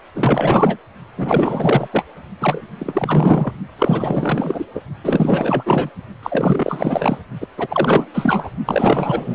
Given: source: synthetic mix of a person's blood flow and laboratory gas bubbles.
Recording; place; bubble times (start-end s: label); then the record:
Doppler ultrasound of blood flow; precordium
0.14-0.77 s: bubbles
1.17-1.88 s: bubbles
1.92-2.05 s: bubbles
2.41-2.67 s: bubbles
2.79-3.52 s: bubbles
3.79-4.65 s: bubbles
4.75-4.82 s: bubbles
5.04-5.90 s: bubbles
6.22-7.17 s: bubbles
7.41-7.47 s: bubbles
7.58-8.08 s: bubbles
8.13-8.49 s: bubbles
8.65-9.35 s: bubbles
From the record:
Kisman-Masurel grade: 444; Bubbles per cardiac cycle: continuous sound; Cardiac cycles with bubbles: 100%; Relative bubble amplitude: maximal (0.775 to 0.999); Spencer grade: 4 (maximum detectable bubble signal sounding continuously throughout systole and diastole of every cardiac period, and overriding the amplitude of the normal cardiac signals); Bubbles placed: only in the low amplitude regions of the cardiac cycle